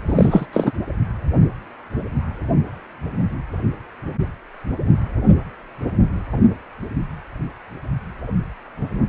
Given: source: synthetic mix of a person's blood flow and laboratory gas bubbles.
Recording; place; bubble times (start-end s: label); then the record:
Doppler ultrasound of blood flow; precordium
0.08-0.46 s: bubbles
0.52-0.72 s: bubbles
From the record:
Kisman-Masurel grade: 223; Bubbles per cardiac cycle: several, 3 to 8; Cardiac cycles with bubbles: 10 to 50%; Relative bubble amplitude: loud (0.450 to 0.775); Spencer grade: 2 (many but less than half of the cardiac periods contain bubble signals, singularly or in groups); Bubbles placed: anywhere in the cardiac cycle